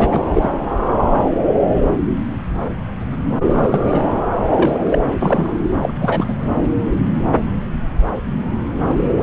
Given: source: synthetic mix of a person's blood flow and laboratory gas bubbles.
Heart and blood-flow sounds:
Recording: Doppler ultrasound of blood flow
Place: subclavian vein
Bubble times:
0.00-0.50 s: bubbles
3.51-4.01 s: bubbles
4.43-5.15 s: bubbles
5.21-5.53 s: bubbles
5.81-5.93 s: bubbles
6.00-6.25 s: bubbles
6.27-6.33 s: bubbles
8.88-8.97 s: bubbles
9.17-9.23 s: bubbles
From the record:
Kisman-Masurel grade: 222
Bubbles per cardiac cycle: several, 3 to 8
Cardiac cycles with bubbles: 10 to 50%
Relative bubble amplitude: moderate (0.250 to 0.450)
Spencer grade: 2 (many but less than half of the cardiac periods contain bubble signals, singularly or in groups)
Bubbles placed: anywhere in the cardiac cycle

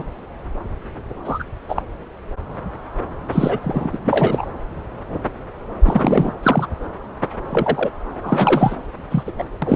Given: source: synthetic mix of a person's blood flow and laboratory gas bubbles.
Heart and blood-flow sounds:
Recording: Doppler ultrasound of blood flow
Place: subclavian vein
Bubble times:
0.00-0.03 s: bubbles
1.25-1.45 s: bubbles
1.69-1.82 s: bubbles
3.32-3.58 s: bubbles
3.61-3.89 s: bubbles
3.92-3.98 s: bubbles
4.05-4.46 s: bubbles
5.83-6.34 s: bubbles
6.43-6.67 s: bubbles
7.50-7.91 s: bubbles
8.22-8.77 s: bubbles
9.11-9.23 s: bubbles
9.26-9.32 s: bubbles
9.38-9.44 s: bubbles
9.62-9.76 s: bubbles
From the record:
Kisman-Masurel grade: 233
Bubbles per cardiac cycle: several, 3 to 8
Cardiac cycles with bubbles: 50 to 99%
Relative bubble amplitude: loud (0.450 to 0.775)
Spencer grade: 3 (all of the cardiac periods contain showers or single bubble signals, but not dominating or overriding the cardiac motion signals)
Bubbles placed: anywhere in the cardiac cycle

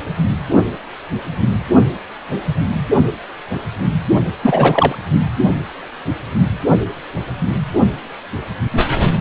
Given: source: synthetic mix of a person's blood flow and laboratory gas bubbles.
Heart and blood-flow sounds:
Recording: Doppler ultrasound of blood flow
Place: precordium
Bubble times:
4.42-4.96 s: bubbles
From the record:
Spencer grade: 1 (occasional bubble signal discernible with the cardiac motion signal, with majority of cardiac periods free of bubbles)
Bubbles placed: anywhere in the cardiac cycle

